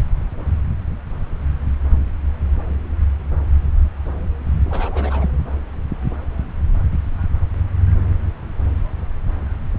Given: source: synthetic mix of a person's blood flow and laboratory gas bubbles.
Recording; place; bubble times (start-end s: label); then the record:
Doppler ultrasound of blood flow; subclavian vein
4.68-5.32 s: bubbles
From the record:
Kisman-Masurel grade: 211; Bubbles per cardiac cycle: several, 3 to 8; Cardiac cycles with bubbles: 1 to 10%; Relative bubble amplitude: barely perceptible (0.100 to 0.250); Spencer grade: 1 (occasional bubble signal discernible with the cardiac motion signal, with majority of cardiac periods free of bubbles); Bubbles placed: anywhere in the cardiac cycle